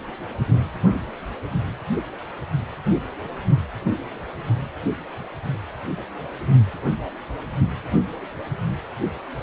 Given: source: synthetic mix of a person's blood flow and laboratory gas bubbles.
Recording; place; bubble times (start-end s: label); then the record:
Doppler ultrasound of blood flow; precordium
no bubbles
From the record:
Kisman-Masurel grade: 000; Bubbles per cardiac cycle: 0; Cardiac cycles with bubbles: 0%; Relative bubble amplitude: no bubbles discernible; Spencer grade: 0 (complete lack of bubble signals)